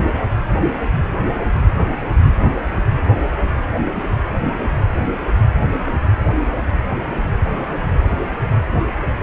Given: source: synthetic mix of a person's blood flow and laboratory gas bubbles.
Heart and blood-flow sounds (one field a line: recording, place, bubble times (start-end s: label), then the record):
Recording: Doppler ultrasound of blood flow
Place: precordium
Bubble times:
5.28-5.33 s: bubbles
From the record:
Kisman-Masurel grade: 121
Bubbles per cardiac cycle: 1 to 2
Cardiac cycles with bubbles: 10 to 50%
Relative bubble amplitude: barely perceptible (0.100 to 0.250)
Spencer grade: 2 (many but less than half of the cardiac periods contain bubble signals, singularly or in groups)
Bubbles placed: anywhere in the cardiac cycle